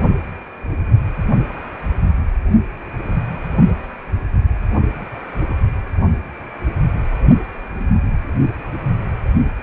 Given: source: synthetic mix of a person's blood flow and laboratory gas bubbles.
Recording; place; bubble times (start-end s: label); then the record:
Doppler ultrasound of blood flow; precordium
no bubbles
From the record:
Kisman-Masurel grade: 000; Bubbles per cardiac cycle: 0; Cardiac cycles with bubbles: 0%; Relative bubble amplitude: no bubbles discernible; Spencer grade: 0 (complete lack of bubble signals)